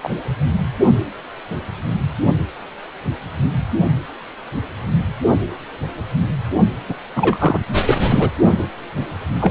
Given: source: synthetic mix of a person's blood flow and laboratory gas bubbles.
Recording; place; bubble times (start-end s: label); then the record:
Doppler ultrasound of blood flow; precordium
0.00-0.10 s: bubbles
6.88-6.95 s: bubbles
7.15-7.57 s: bubbles
7.86-7.94 s: bubbles
8.01-8.30 s: bubbles
9.40-9.51 s: bubbles
From the record:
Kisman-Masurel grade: 223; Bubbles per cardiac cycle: several, 3 to 8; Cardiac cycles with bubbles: 10 to 50%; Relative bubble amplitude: loud (0.450 to 0.775); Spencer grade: 2 (many but less than half of the cardiac periods contain bubble signals, singularly or in groups); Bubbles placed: anywhere in the cardiac cycle